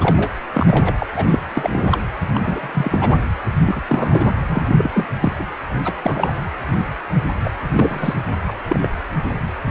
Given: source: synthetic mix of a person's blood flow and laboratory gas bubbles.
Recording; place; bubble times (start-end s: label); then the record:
Doppler ultrasound of blood flow; precordium
0.01-0.32 s: bubbles
0.53-0.94 s: bubbles
0.99-1.07 s: bubbles
1.16-1.39 s: bubbles
1.54-2.01 s: bubbles
2.33-2.40 s: bubbles
2.44-3.15 s: bubbles
3.67-3.82 s: bubbles
3.88-4.32 s: bubbles
4.49-4.66 s: bubbles
4.78-4.90 s: bubbles
4.93-5.05 s: bubbles
5.20-5.33 s: bubbles
5.39-5.44 s: bubbles
5.84-5.93 s: bubbles
6.02-6.33 s: bubbles
7.43-7.53 s: bubbles
7.76-8.14 s: bubbles
8.46-8.54 s: bubbles
8.69-8.87 s: bubbles
9.66-9.71 s: bubbles
From the record:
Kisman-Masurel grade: 242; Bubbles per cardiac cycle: several, 3 to 8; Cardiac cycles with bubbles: 100%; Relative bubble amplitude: moderate (0.250 to 0.450); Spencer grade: 3 (all of the cardiac periods contain showers or single bubble signals, but not dominating or overriding the cardiac motion signals); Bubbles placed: anywhere in the cardiac cycle